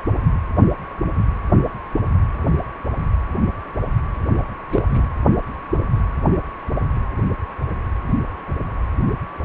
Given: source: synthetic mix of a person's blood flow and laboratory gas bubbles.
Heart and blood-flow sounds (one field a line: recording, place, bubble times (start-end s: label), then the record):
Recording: Doppler ultrasound of blood flow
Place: precordium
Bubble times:
4.71-4.82 s: bubbles
4.90-5.01 s: bubbles
From the record:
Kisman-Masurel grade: 122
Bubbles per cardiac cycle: 1 to 2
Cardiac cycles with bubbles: 10 to 50%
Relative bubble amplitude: moderate (0.250 to 0.450)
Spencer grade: 2 (many but less than half of the cardiac periods contain bubble signals, singularly or in groups)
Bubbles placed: anywhere in the cardiac cycle